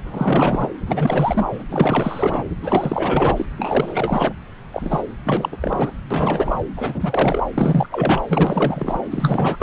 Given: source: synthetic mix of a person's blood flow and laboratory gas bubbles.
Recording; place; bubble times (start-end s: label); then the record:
Doppler ultrasound of blood flow; subclavian vein
0.04-0.68 s: bubbles
0.85-1.48 s: bubbles
1.52-1.64 s: bubbles
1.69-2.45 s: bubbles
2.61-3.46 s: bubbles
3.57-4.33 s: bubbles
4.71-5.03 s: bubbles
5.24-5.49 s: bubbles
5.51-5.57 s: bubbles
5.60-5.92 s: bubbles
6.10-6.61 s: bubbles
6.76-7.45 s: bubbles
7.54-7.86 s: bubbles
7.91-8.22 s: bubbles
8.29-9.02 s: bubbles
9.11-9.63 s: bubbles
From the record:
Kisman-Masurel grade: 444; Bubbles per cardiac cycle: continuous sound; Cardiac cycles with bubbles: 100%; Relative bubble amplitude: maximal (0.775 to 0.999); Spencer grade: 4 (maximum detectable bubble signal sounding continuously throughout systole and diastole of every cardiac period, and overriding the amplitude of the normal cardiac signals); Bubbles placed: anywhere in the cardiac cycle